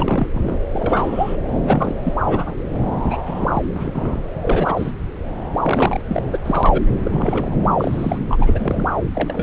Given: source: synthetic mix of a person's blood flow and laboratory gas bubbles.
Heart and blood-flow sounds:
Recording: Doppler ultrasound of blood flow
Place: subclavian vein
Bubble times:
0.00-0.26 s: bubbles
0.33-0.58 s: bubbles
0.72-1.36 s: bubbles
1.67-1.95 s: bubbles
2.03-2.12 s: bubbles
2.27-2.65 s: bubbles
2.99-3.46 s: bubbles
3.52-3.62 s: bubbles
3.75-4.21 s: bubbles
4.41-4.92 s: bubbles
5.62-6.00 s: bubbles
6.08-6.23 s: bubbles
6.31-6.38 s: bubbles
6.46-6.82 s: bubbles
7.04-7.56 s: bubbles
7.78-8.18 s: bubbles
8.29-8.87 s: bubbles
9.14-9.42 s: bubbles
From the record:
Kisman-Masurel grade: 232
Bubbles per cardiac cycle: several, 3 to 8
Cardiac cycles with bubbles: 50 to 99%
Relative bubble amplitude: moderate (0.250 to 0.450)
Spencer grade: 3 (all of the cardiac periods contain showers or single bubble signals, but not dominating or overriding the cardiac motion signals)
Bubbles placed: anywhere in the cardiac cycle

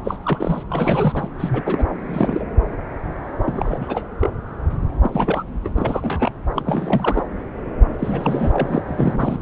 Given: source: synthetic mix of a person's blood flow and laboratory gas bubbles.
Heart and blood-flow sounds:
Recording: Doppler ultrasound of blood flow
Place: subclavian vein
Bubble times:
0.04-0.16 s: bubbles
0.23-0.64 s: bubbles
0.70-1.28 s: bubbles
1.39-1.62 s: bubbles
1.66-1.85 s: bubbles
1.99-2.44 s: bubbles
3.44-4.07 s: bubbles
4.20-4.30 s: bubbles
5.03-5.43 s: bubbles
5.64-5.70 s: bubbles
5.75-6.31 s: bubbles
6.54-7.23 s: bubbles
7.99-8.82 s: bubbles
8.87-9.39 s: bubbles
From the record:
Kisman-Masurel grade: 332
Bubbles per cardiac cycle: rolling drumbeat, 9 or more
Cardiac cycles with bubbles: 50 to 99%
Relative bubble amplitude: moderate (0.250 to 0.450)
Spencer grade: 3 (all of the cardiac periods contain showers or single bubble signals, but not dominating or overriding the cardiac motion signals)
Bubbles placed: anywhere in the cardiac cycle

